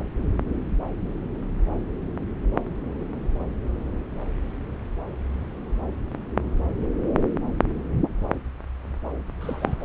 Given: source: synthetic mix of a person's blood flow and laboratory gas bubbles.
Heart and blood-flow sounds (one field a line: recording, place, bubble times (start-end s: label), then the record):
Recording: Doppler ultrasound of blood flow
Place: subclavian vein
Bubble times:
9.40-9.75 s: bubbles
9.80-9.84 s: bubbles
From the record:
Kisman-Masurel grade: 112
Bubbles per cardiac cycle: 1 to 2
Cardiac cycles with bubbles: 1 to 10%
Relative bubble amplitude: moderate (0.250 to 0.450)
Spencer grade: 1 (occasional bubble signal discernible with the cardiac motion signal, with majority of cardiac periods free of bubbles)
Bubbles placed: anywhere in the cardiac cycle